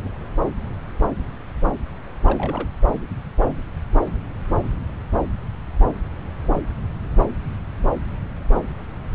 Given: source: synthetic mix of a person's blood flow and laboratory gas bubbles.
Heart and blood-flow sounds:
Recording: Doppler ultrasound of blood flow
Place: subclavian vein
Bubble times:
2.25-2.67 s: bubbles
From the record:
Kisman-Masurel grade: 211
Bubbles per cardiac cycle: several, 3 to 8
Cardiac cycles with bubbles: 1 to 10%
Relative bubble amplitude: barely perceptible (0.100 to 0.250)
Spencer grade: 1 (occasional bubble signal discernible with the cardiac motion signal, with majority of cardiac periods free of bubbles)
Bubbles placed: anywhere in the cardiac cycle

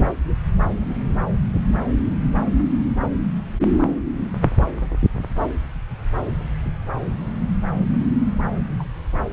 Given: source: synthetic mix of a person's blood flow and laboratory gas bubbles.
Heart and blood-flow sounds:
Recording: Doppler ultrasound of blood flow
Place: subclavian vein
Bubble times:
8.78-8.85 s: bubbles
9.15-9.24 s: bubbles
From the record:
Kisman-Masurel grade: 111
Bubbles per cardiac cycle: 1 to 2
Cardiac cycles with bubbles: 1 to 10%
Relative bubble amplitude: barely perceptible (0.100 to 0.250)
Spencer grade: 1 (occasional bubble signal discernible with the cardiac motion signal, with majority of cardiac periods free of bubbles)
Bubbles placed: anywhere in the cardiac cycle

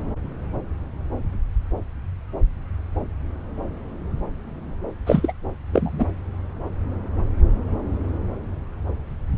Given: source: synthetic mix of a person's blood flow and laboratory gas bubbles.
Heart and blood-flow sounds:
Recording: Doppler ultrasound of blood flow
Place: subclavian vein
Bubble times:
5.06-5.32 s: bubbles
5.73-6.06 s: bubbles
From the record:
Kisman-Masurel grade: 212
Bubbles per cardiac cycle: several, 3 to 8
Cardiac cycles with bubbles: 1 to 10%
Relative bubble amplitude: moderate (0.250 to 0.450)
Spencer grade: 1 (occasional bubble signal discernible with the cardiac motion signal, with majority of cardiac periods free of bubbles)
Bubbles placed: anywhere in the cardiac cycle

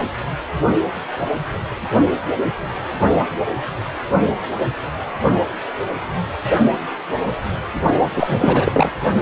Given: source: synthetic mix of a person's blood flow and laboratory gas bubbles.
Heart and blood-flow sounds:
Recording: Doppler ultrasound of blood flow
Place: precordium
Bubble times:
8.16-8.91 s: bubbles
From the record:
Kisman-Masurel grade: 213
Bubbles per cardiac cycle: several, 3 to 8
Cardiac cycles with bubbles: 1 to 10%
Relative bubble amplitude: loud (0.450 to 0.775)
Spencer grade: 1 (occasional bubble signal discernible with the cardiac motion signal, with majority of cardiac periods free of bubbles)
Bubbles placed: anywhere in the cardiac cycle

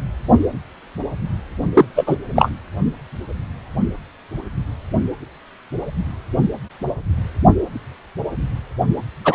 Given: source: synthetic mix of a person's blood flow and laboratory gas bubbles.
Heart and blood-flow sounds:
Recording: Doppler ultrasound of blood flow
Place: precordium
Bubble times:
1.75-1.85 s: bubbles
1.96-2.17 s: bubbles
2.35-2.50 s: bubbles
9.24-9.35 s: bubbles
From the record:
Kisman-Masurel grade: 223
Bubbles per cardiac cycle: several, 3 to 8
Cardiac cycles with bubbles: 10 to 50%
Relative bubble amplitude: loud (0.450 to 0.775)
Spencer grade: 2 (many but less than half of the cardiac periods contain bubble signals, singularly or in groups)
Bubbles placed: only in the low amplitude regions of the cardiac cycle

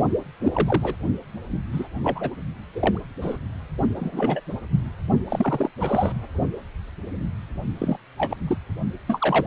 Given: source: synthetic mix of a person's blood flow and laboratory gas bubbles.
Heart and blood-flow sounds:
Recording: Doppler ultrasound of blood flow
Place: precordium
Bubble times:
0.40-0.95 s: bubbles
1.73-1.88 s: bubbles
2.04-2.30 s: bubbles
2.75-2.98 s: bubbles
3.22-3.37 s: bubbles
3.96-4.41 s: bubbles
5.29-5.71 s: bubbles
5.80-6.12 s: bubbles
7.78-7.97 s: bubbles
8.17-8.36 s: bubbles
8.47-8.57 s: bubbles
9.07-9.47 s: bubbles
From the record:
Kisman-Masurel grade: 232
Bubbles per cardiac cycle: several, 3 to 8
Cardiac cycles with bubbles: 50 to 99%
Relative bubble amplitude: moderate (0.250 to 0.450)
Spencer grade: 3 (all of the cardiac periods contain showers or single bubble signals, but not dominating or overriding the cardiac motion signals)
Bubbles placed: only in the low amplitude regions of the cardiac cycle

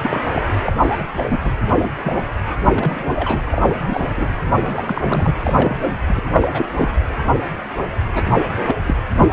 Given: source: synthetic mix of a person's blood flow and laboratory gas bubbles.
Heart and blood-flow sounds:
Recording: Doppler ultrasound of blood flow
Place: precordium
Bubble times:
0.02-0.20 s: bubbles
0.33-0.42 s: bubbles
0.63-0.72 s: bubbles
0.80-0.99 s: bubbles
1.14-1.39 s: bubbles
1.45-1.51 s: bubbles
1.80-1.89 s: bubbles
1.97-2.23 s: bubbles
2.63-3.41 s: bubbles
3.52-4.12 s: bubbles
4.16-4.29 s: bubbles
4.44-5.36 s: bubbles
5.39-5.77 s: bubbles
5.82-5.99 s: bubbles
6.07-6.23 s: bubbles
6.32-7.02 s: bubbles
8.15-8.46 s: bubbles
8.51-8.76 s: bubbles
8.87-8.95 s: bubbles
9.16-9.26 s: bubbles
From the record:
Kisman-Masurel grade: 232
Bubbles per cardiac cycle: several, 3 to 8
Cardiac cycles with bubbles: 50 to 99%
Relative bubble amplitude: moderate (0.250 to 0.450)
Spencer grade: 3 (all of the cardiac periods contain showers or single bubble signals, but not dominating or overriding the cardiac motion signals)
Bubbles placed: anywhere in the cardiac cycle

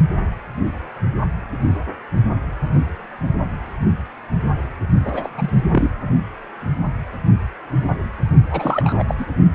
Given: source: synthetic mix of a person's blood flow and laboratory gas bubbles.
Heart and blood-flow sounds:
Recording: Doppler ultrasound of blood flow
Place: precordium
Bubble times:
5.05-5.29 s: bubbles
5.38-5.50 s: bubbles
5.71-5.90 s: bubbles
8.50-9.04 s: bubbles
9.08-9.15 s: bubbles
9.18-9.26 s: bubbles
From the record:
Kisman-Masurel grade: 222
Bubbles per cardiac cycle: several, 3 to 8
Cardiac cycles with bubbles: 10 to 50%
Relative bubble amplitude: moderate (0.250 to 0.450)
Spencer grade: 2 (many but less than half of the cardiac periods contain bubble signals, singularly or in groups)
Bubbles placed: only in the low amplitude regions of the cardiac cycle

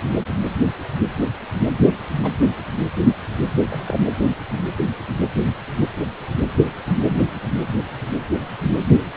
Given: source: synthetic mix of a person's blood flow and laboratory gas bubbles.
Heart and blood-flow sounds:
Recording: Doppler ultrasound of blood flow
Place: precordium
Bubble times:
2.23-2.32 s: bubbles
3.57-4.00 s: bubbles
From the record:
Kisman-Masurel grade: 121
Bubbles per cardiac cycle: 1 to 2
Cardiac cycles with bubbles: 10 to 50%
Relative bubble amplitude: barely perceptible (0.100 to 0.250)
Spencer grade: 2 (many but less than half of the cardiac periods contain bubble signals, singularly or in groups)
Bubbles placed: anywhere in the cardiac cycle

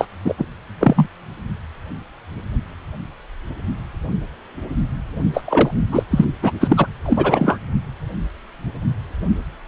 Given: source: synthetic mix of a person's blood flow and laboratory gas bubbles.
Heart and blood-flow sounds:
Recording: Doppler ultrasound of blood flow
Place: precordium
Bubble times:
0.00-0.05 s: bubbles
0.24-0.34 s: bubbles
0.38-0.46 s: bubbles
0.80-1.07 s: bubbles
5.33-5.71 s: bubbles
5.92-6.03 s: bubbles
6.10-6.25 s: bubbles
6.42-6.52 s: bubbles
6.60-6.86 s: bubbles
7.05-7.58 s: bubbles
From the record:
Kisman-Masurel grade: 223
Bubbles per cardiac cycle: several, 3 to 8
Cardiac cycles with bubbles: 10 to 50%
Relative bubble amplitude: loud (0.450 to 0.775)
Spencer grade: 2 (many but less than half of the cardiac periods contain bubble signals, singularly or in groups)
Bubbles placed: only in the low amplitude regions of the cardiac cycle

